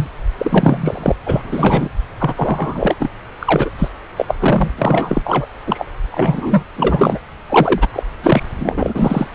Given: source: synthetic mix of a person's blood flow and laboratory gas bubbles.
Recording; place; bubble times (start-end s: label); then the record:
Doppler ultrasound of blood flow; subclavian vein
0.00-0.09 s: bubbles
0.37-1.15 s: bubbles
1.26-1.89 s: bubbles
2.18-2.95 s: bubbles
2.99-3.09 s: bubbles
3.40-3.69 s: bubbles
3.78-3.88 s: bubbles
4.17-4.25 s: bubbles
4.28-4.34 s: bubbles
4.39-4.71 s: bubbles
4.77-5.46 s: bubbles
5.66-5.85 s: bubbles
6.12-6.66 s: bubbles
6.76-7.19 s: bubbles
7.49-7.88 s: bubbles
7.93-8.03 s: bubbles
8.23-8.43 s: bubbles
8.59-9.27 s: bubbles
From the record:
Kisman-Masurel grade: 343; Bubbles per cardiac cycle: rolling drumbeat, 9 or more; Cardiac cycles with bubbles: 100%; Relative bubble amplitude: loud (0.450 to 0.775); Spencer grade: 3 (all of the cardiac periods contain showers or single bubble signals, but not dominating or overriding the cardiac motion signals); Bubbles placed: anywhere in the cardiac cycle